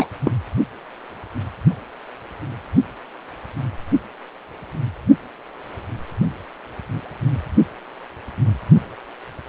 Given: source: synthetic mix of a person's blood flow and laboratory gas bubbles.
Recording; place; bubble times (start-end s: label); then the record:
Doppler ultrasound of blood flow; precordium
0.00-0.07 s: bubbles
0.24-0.32 s: bubbles
From the record:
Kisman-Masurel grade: 213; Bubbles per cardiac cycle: several, 3 to 8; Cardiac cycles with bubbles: 1 to 10%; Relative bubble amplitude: loud (0.450 to 0.775); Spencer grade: 1 (occasional bubble signal discernible with the cardiac motion signal, with majority of cardiac periods free of bubbles); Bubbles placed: only in the low amplitude regions of the cardiac cycle